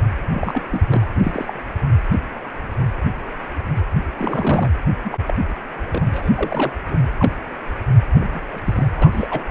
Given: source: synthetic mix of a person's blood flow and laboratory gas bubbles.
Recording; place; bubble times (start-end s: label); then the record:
Doppler ultrasound of blood flow; precordium
0.33-0.61 s: bubbles
0.71-0.82 s: bubbles
0.89-1.08 s: bubbles
1.16-1.53 s: bubbles
4.18-4.72 s: bubbles
5.04-5.17 s: bubbles
5.27-5.34 s: bubbles
5.92-6.30 s: bubbles
6.35-6.72 s: bubbles
6.88-6.96 s: bubbles
7.19-7.35 s: bubbles
8.15-8.41 s: bubbles
8.53-8.61 s: bubbles
8.65-8.88 s: bubbles
8.98-9.43 s: bubbles
From the record:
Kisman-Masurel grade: 232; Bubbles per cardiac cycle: several, 3 to 8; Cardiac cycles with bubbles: 50 to 99%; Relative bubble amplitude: moderate (0.250 to 0.450); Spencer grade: 3 (all of the cardiac periods contain showers or single bubble signals, but not dominating or overriding the cardiac motion signals); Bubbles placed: anywhere in the cardiac cycle